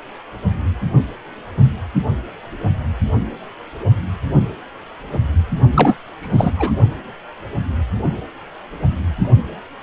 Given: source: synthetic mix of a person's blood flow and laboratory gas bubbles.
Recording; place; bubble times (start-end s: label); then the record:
Doppler ultrasound of blood flow; precordium
5.72-5.95 s: bubbles
6.21-6.50 s: bubbles
6.56-6.71 s: bubbles
From the record:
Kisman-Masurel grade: 213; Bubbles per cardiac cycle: several, 3 to 8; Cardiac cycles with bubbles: 1 to 10%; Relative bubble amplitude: loud (0.450 to 0.775); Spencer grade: 1 (occasional bubble signal discernible with the cardiac motion signal, with majority of cardiac periods free of bubbles); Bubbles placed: only in the low amplitude regions of the cardiac cycle